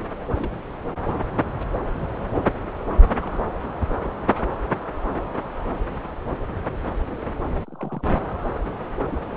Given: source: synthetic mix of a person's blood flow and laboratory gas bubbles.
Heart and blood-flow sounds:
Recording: Doppler ultrasound of blood flow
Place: subclavian vein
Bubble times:
0.34-0.63 s: bubbles
0.98-1.04 s: bubbles
3.03-3.42 s: bubbles
3.79-4.17 s: bubbles
4.28-4.37 s: bubbles
4.70-4.78 s: bubbles
7.67-8.05 s: bubbles
9.11-9.18 s: bubbles
From the record:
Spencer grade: 2 (many but less than half of the cardiac periods contain bubble signals, singularly or in groups)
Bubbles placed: anywhere in the cardiac cycle

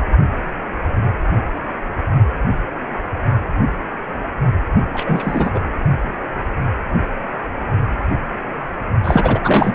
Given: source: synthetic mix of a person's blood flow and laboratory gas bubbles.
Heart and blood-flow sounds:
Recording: Doppler ultrasound of blood flow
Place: precordium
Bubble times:
4.94-5.51 s: bubbles
5.54-5.60 s: bubbles
9.04-9.75 s: bubbles
From the record:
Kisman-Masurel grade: 223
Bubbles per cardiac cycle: several, 3 to 8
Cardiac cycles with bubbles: 10 to 50%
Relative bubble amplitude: loud (0.450 to 0.775)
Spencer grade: 2 (many but less than half of the cardiac periods contain bubble signals, singularly or in groups)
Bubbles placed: only in the low amplitude regions of the cardiac cycle

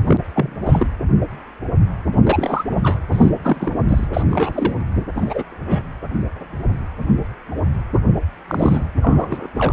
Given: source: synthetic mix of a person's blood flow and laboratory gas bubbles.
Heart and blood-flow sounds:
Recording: Doppler ultrasound of blood flow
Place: precordium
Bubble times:
0.07-0.20 s: bubbles
0.35-0.56 s: bubbles
0.65-0.87 s: bubbles
2.26-2.64 s: bubbles
2.69-2.99 s: bubbles
3.11-3.30 s: bubbles
3.43-4.07 s: bubbles
4.13-4.23 s: bubbles
4.31-4.75 s: bubbles
5.15-5.43 s: bubbles
5.50-5.85 s: bubbles
8.47-8.86 s: bubbles
9.02-9.47 s: bubbles
9.54-9.73 s: bubbles
From the record:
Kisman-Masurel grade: 232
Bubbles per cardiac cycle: several, 3 to 8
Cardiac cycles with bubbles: 50 to 99%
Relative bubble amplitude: moderate (0.250 to 0.450)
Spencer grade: 3 (all of the cardiac periods contain showers or single bubble signals, but not dominating or overriding the cardiac motion signals)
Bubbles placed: anywhere in the cardiac cycle

